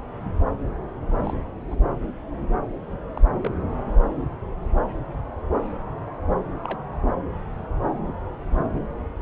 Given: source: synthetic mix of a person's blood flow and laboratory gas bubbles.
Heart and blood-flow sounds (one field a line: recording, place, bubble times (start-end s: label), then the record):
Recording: Doppler ultrasound of blood flow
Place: subclavian vein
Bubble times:
1.24-1.34 s: bubbles
1.70-1.75 s: bubbles
3.17-3.19 s: bubbles
3.38-3.52 s: bubbles
6.62-6.81 s: bubbles
8.07-8.13 s: bubbles
8.52-8.66 s: bubbles
From the record:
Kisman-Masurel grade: 121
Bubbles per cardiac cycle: 1 to 2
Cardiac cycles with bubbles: 10 to 50%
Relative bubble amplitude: barely perceptible (0.100 to 0.250)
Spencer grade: 2 (many but less than half of the cardiac periods contain bubble signals, singularly or in groups)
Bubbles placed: anywhere in the cardiac cycle